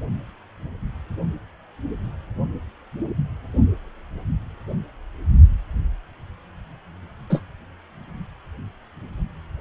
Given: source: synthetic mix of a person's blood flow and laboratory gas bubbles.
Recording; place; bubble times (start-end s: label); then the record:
Doppler ultrasound of blood flow; precordium
7.29-7.41 s: bubbles
From the record:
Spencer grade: 1 (occasional bubble signal discernible with the cardiac motion signal, with majority of cardiac periods free of bubbles); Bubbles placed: only in the low amplitude regions of the cardiac cycle